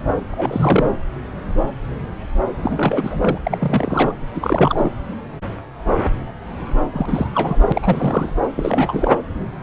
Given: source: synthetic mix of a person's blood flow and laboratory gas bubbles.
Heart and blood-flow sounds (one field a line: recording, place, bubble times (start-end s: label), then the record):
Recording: Doppler ultrasound of blood flow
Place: subclavian vein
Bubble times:
0.31-0.92 s: bubbles
2.63-3.38 s: bubbles
3.43-4.14 s: bubbles
4.34-4.92 s: bubbles
6.93-7.27 s: bubbles
7.34-8.38 s: bubbles
8.56-9.13 s: bubbles
From the record:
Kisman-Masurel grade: 332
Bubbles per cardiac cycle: rolling drumbeat, 9 or more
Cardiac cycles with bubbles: 50 to 99%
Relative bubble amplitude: moderate (0.250 to 0.450)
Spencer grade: 3 (all of the cardiac periods contain showers or single bubble signals, but not dominating or overriding the cardiac motion signals)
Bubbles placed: anywhere in the cardiac cycle